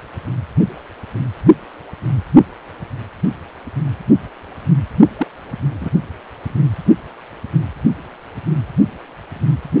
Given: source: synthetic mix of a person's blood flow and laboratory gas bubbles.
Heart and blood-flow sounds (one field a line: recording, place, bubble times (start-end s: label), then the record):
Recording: Doppler ultrasound of blood flow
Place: precordium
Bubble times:
5.18-5.27 s: bubbles
5.80-5.90 s: bubbles
From the record:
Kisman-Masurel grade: 112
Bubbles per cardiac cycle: 1 to 2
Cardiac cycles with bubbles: 1 to 10%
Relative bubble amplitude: moderate (0.250 to 0.450)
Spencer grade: 1 (occasional bubble signal discernible with the cardiac motion signal, with majority of cardiac periods free of bubbles)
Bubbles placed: only in the low amplitude regions of the cardiac cycle